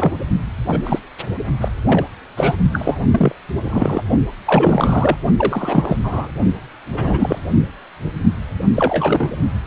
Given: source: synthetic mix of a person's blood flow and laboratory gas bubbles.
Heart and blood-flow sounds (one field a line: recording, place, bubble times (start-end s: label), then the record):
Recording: Doppler ultrasound of blood flow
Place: precordium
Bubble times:
0.00-0.20 s: bubbles
0.68-0.80 s: bubbles
0.84-0.99 s: bubbles
1.60-1.69 s: bubbles
1.86-2.04 s: bubbles
2.36-2.56 s: bubbles
2.73-2.98 s: bubbles
3.11-3.32 s: bubbles
3.62-4.02 s: bubbles
4.45-5.17 s: bubbles
5.37-5.98 s: bubbles
6.04-6.30 s: bubbles
6.93-7.39 s: bubbles
8.74-9.29 s: bubbles
From the record:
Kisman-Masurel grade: 233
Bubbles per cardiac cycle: several, 3 to 8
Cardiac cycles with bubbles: 50 to 99%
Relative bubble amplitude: loud (0.450 to 0.775)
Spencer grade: 3 (all of the cardiac periods contain showers or single bubble signals, but not dominating or overriding the cardiac motion signals)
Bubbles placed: only in the low amplitude regions of the cardiac cycle